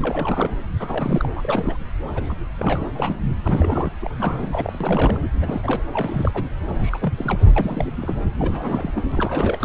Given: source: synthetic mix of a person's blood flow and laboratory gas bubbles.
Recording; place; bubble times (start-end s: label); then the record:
Doppler ultrasound of blood flow; subclavian vein
0.02-0.51 s: bubbles
0.79-1.25 s: bubbles
1.35-1.77 s: bubbles
2.08-2.11 s: bubbles
2.15-2.35 s: bubbles
2.58-2.85 s: bubbles
2.95-3.16 s: bubbles
3.44-3.90 s: bubbles
4.00-4.15 s: bubbles
4.18-5.20 s: bubbles
5.33-5.82 s: bubbles
5.93-6.47 s: bubbles
6.67-7.13 s: bubbles
7.18-7.53 s: bubbles
7.56-8.27 s: bubbles
8.39-9.04 s: bubbles
9.11-9.65 s: bubbles
From the record:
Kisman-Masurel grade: 342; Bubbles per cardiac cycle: rolling drumbeat, 9 or more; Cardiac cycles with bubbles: 100%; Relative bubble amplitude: moderate (0.250 to 0.450); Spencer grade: 3 (all of the cardiac periods contain showers or single bubble signals, but not dominating or overriding the cardiac motion signals); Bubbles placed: anywhere in the cardiac cycle